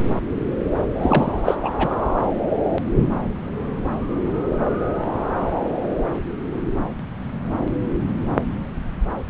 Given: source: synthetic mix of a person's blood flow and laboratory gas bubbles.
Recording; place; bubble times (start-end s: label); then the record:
Doppler ultrasound of blood flow; subclavian vein
1.01-1.32 s: bubbles
1.44-1.57 s: bubbles
1.62-1.72 s: bubbles
1.77-1.95 s: bubbles
From the record:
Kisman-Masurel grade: 212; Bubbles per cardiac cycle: several, 3 to 8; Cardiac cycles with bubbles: 1 to 10%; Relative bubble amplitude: moderate (0.250 to 0.450); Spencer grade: 1 (occasional bubble signal discernible with the cardiac motion signal, with majority of cardiac periods free of bubbles); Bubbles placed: anywhere in the cardiac cycle